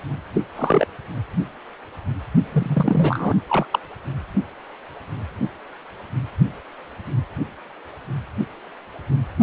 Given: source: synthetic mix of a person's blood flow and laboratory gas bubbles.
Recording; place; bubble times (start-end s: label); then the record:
Doppler ultrasound of blood flow; precordium
0.33-0.42 s: bubbles
0.55-0.85 s: bubbles
2.52-3.34 s: bubbles
3.48-3.65 s: bubbles
3.71-3.79 s: bubbles
From the record:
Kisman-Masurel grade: 222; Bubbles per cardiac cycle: several, 3 to 8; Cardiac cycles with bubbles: 10 to 50%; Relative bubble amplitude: moderate (0.250 to 0.450); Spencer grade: 2 (many but less than half of the cardiac periods contain bubble signals, singularly or in groups); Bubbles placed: anywhere in the cardiac cycle